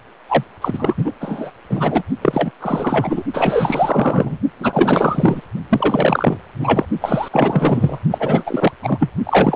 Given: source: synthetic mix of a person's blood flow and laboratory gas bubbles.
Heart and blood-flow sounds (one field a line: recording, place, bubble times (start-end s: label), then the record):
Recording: Doppler ultrasound of blood flow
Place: precordium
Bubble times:
0.28-0.45 s: bubbles
0.61-0.94 s: bubbles
0.97-1.13 s: bubbles
1.20-1.50 s: bubbles
1.69-2.03 s: bubbles
2.21-2.51 s: bubbles
2.60-3.23 s: bubbles
3.33-4.38 s: bubbles
4.59-5.41 s: bubbles
5.69-6.37 s: bubbles
6.59-6.85 s: bubbles
7.01-7.29 s: bubbles
7.31-7.98 s: bubbles
8.11-8.43 s: bubbles
8.46-8.72 s: bubbles
8.82-9.10 s: bubbles
9.25-9.56 s: bubbles
From the record:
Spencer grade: 4 (maximum detectable bubble signal sounding continuously throughout systole and diastole of every cardiac period, and overriding the amplitude of the normal cardiac signals)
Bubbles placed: only in the low amplitude regions of the cardiac cycle